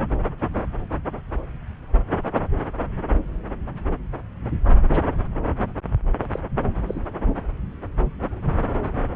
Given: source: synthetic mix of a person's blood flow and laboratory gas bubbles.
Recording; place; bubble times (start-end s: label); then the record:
Doppler ultrasound of blood flow; subclavian vein
4.90-5.00 s: bubbles
6.21-6.27 s: bubbles
6.32-6.40 s: bubbles
6.86-7.02 s: bubbles
8.83-8.89 s: bubbles
From the record:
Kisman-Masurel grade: 121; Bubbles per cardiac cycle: 1 to 2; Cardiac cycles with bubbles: 10 to 50%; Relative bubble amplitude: barely perceptible (0.100 to 0.250); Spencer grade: 2 (many but less than half of the cardiac periods contain bubble signals, singularly or in groups); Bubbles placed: anywhere in the cardiac cycle